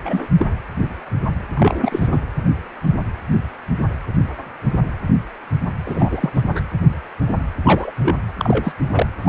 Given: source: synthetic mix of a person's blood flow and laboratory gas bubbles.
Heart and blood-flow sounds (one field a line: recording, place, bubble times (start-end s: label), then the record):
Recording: Doppler ultrasound of blood flow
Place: precordium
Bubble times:
0.04-0.28 s: bubbles
0.39-0.46 s: bubbles
1.55-2.08 s: bubbles
2.11-2.20 s: bubbles
5.86-6.30 s: bubbles
6.35-6.42 s: bubbles
6.54-6.62 s: bubbles
7.65-7.91 s: bubbles
8.02-8.16 s: bubbles
8.37-8.73 s: bubbles
8.92-9.06 s: bubbles
9.24-9.29 s: bubbles
From the record:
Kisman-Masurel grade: 233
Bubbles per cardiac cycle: several, 3 to 8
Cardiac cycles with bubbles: 50 to 99%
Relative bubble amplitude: loud (0.450 to 0.775)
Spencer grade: 3 (all of the cardiac periods contain showers or single bubble signals, but not dominating or overriding the cardiac motion signals)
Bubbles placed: anywhere in the cardiac cycle